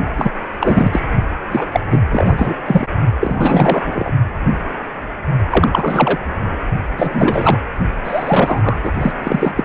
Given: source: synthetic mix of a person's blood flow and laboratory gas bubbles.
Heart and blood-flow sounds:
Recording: Doppler ultrasound of blood flow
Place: precordium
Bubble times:
0.18-0.30 s: bubbles
0.60-1.00 s: bubbles
1.51-1.65 s: bubbles
1.71-1.80 s: bubbles
1.91-2.01 s: bubbles
2.10-2.55 s: bubbles
2.65-2.86 s: bubbles
3.20-4.13 s: bubbles
5.51-5.68 s: bubbles
5.72-6.19 s: bubbles
6.97-7.57 s: bubbles
8.04-8.79 s: bubbles
8.84-8.93 s: bubbles
9.00-9.12 s: bubbles
9.23-9.52 s: bubbles
9.56-9.63 s: bubbles
From the record:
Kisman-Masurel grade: 333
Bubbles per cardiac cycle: rolling drumbeat, 9 or more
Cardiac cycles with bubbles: 50 to 99%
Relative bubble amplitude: loud (0.450 to 0.775)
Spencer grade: 3 (all of the cardiac periods contain showers or single bubble signals, but not dominating or overriding the cardiac motion signals)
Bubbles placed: only in the low amplitude regions of the cardiac cycle

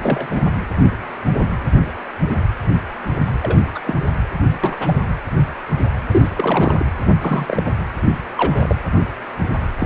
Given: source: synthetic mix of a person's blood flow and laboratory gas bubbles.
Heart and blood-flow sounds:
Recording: Doppler ultrasound of blood flow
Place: precordium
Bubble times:
0.02-0.27 s: bubbles
0.30-0.42 s: bubbles
3.26-3.31 s: bubbles
3.43-3.59 s: bubbles
3.75-3.80 s: bubbles
3.84-4.00 s: bubbles
4.63-4.77 s: bubbles
4.79-5.01 s: bubbles
6.11-6.28 s: bubbles
6.37-6.88 s: bubbles
7.21-7.71 s: bubbles
8.36-8.76 s: bubbles
9.77-9.86 s: bubbles
From the record:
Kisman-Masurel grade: 232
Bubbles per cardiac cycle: several, 3 to 8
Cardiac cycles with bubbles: 50 to 99%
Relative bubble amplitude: moderate (0.250 to 0.450)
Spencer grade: 3 (all of the cardiac periods contain showers or single bubble signals, but not dominating or overriding the cardiac motion signals)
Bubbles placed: anywhere in the cardiac cycle

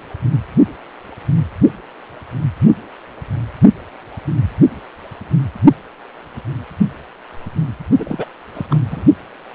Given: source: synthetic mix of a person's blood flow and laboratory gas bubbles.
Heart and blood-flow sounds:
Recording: Doppler ultrasound of blood flow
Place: precordium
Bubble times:
7.99-8.25 s: bubbles
8.55-8.67 s: bubbles
8.69-8.80 s: bubbles
8.91-9.04 s: bubbles
From the record:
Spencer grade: 1 (occasional bubble signal discernible with the cardiac motion signal, with majority of cardiac periods free of bubbles)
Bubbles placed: only in the low amplitude regions of the cardiac cycle

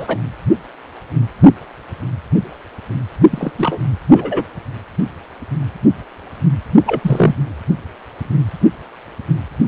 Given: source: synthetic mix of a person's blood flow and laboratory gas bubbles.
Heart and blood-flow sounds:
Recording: Doppler ultrasound of blood flow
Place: precordium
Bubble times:
0.00-0.17 s: bubbles
3.31-3.51 s: bubbles
3.58-3.78 s: bubbles
4.08-4.45 s: bubbles
6.85-7.34 s: bubbles
From the record:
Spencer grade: 2 (many but less than half of the cardiac periods contain bubble signals, singularly or in groups)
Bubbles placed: only in the low amplitude regions of the cardiac cycle

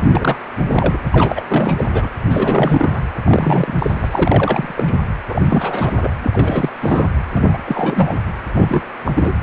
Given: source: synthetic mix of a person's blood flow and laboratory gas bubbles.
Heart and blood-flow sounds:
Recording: Doppler ultrasound of blood flow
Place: precordium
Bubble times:
0.11-0.37 s: bubbles
0.69-0.97 s: bubbles
1.11-1.44 s: bubbles
1.48-2.09 s: bubbles
2.28-3.00 s: bubbles
3.25-4.73 s: bubbles
4.75-4.98 s: bubbles
5.26-6.10 s: bubbles
6.23-6.70 s: bubbles
6.81-7.07 s: bubbles
7.33-7.57 s: bubbles
7.66-8.18 s: bubbles
8.54-8.82 s: bubbles
9.05-9.33 s: bubbles
From the record:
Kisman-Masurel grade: 342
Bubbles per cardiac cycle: rolling drumbeat, 9 or more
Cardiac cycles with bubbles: 100%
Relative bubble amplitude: moderate (0.250 to 0.450)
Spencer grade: 3 (all of the cardiac periods contain showers or single bubble signals, but not dominating or overriding the cardiac motion signals)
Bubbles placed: anywhere in the cardiac cycle

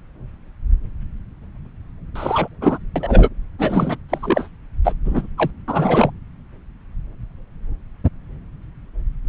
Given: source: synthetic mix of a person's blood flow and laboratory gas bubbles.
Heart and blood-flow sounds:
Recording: Doppler ultrasound of blood flow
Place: subclavian vein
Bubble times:
2.15-2.48 s: bubbles
2.61-2.79 s: bubbles
2.96-3.29 s: bubbles
3.58-3.97 s: bubbles
4.08-4.48 s: bubbles
4.84-4.93 s: bubbles
5.04-5.27 s: bubbles
5.37-5.50 s: bubbles
5.67-6.10 s: bubbles
From the record:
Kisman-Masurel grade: 223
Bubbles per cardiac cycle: several, 3 to 8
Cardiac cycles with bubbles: 10 to 50%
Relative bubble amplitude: loud (0.450 to 0.775)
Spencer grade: 2 (many but less than half of the cardiac periods contain bubble signals, singularly or in groups)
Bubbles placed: anywhere in the cardiac cycle

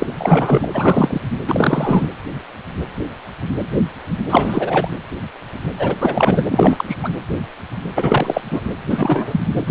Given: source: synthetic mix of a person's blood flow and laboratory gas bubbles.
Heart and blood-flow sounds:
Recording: Doppler ultrasound of blood flow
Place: precordium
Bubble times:
0.00-0.12 s: bubbles
0.17-0.67 s: bubbles
0.74-1.19 s: bubbles
1.47-2.08 s: bubbles
4.30-4.89 s: bubbles
5.79-5.96 s: bubbles
6.00-6.43 s: bubbles
6.51-6.85 s: bubbles
6.88-6.97 s: bubbles
7.03-7.10 s: bubbles
7.96-8.41 s: bubbles
8.50-8.62 s: bubbles
8.89-9.40 s: bubbles
9.54-9.62 s: bubbles
9.67-9.71 s: bubbles
From the record:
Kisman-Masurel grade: 333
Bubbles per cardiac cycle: rolling drumbeat, 9 or more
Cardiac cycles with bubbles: 50 to 99%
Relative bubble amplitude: loud (0.450 to 0.775)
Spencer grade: 3 (all of the cardiac periods contain showers or single bubble signals, but not dominating or overriding the cardiac motion signals)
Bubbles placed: anywhere in the cardiac cycle

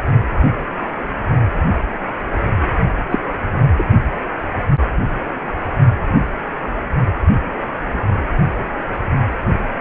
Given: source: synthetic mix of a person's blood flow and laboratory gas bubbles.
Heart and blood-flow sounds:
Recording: Doppler ultrasound of blood flow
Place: precordium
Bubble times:
3.10-3.19 s: bubbles
3.78-3.83 s: bubbles
From the record:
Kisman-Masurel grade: 113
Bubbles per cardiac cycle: 1 to 2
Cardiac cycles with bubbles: 1 to 10%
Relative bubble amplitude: loud (0.450 to 0.775)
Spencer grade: 1 (occasional bubble signal discernible with the cardiac motion signal, with majority of cardiac periods free of bubbles)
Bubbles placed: only in the low amplitude regions of the cardiac cycle

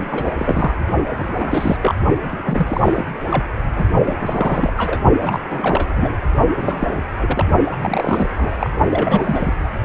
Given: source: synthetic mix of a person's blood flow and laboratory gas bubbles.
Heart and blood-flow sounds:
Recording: Doppler ultrasound of blood flow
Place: precordium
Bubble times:
0.00-0.74 s: bubbles
1.16-1.76 s: bubbles
1.83-1.95 s: bubbles
2.29-3.04 s: bubbles
3.31-3.45 s: bubbles
3.76-3.83 s: bubbles
4.06-4.72 s: bubbles
4.77-5.02 s: bubbles
5.21-6.16 s: bubbles
6.57-7.00 s: bubbles
7.20-7.45 s: bubbles
7.70-8.70 s: bubbles
8.90-9.53 s: bubbles
From the record:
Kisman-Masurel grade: 342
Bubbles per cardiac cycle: rolling drumbeat, 9 or more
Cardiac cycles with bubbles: 100%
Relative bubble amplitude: moderate (0.250 to 0.450)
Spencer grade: 3 (all of the cardiac periods contain showers or single bubble signals, but not dominating or overriding the cardiac motion signals)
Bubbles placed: only in the low amplitude regions of the cardiac cycle

